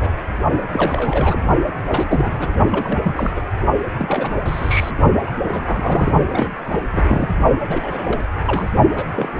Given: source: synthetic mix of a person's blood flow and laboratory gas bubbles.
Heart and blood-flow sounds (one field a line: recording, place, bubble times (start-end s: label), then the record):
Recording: Doppler ultrasound of blood flow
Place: precordium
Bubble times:
0.00-0.12 s: bubbles
0.72-1.44 s: bubbles
1.91-2.55 s: bubbles
2.70-3.42 s: bubbles
3.98-4.30 s: bubbles
4.46-4.91 s: bubbles
5.23-5.31 s: bubbles
5.47-6.12 s: bubbles
6.33-6.54 s: bubbles
6.69-6.81 s: bubbles
6.92-7.33 s: bubbles
7.68-8.21 s: bubbles
8.46-8.71 s: bubbles
8.92-9.04 s: bubbles
9.16-9.29 s: bubbles
9.36-9.40 s: bubbles
From the record:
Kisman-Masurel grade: 342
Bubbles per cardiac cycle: rolling drumbeat, 9 or more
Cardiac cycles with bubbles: 100%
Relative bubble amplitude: moderate (0.250 to 0.450)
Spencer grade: 3 (all of the cardiac periods contain showers or single bubble signals, but not dominating or overriding the cardiac motion signals)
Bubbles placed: only in the low amplitude regions of the cardiac cycle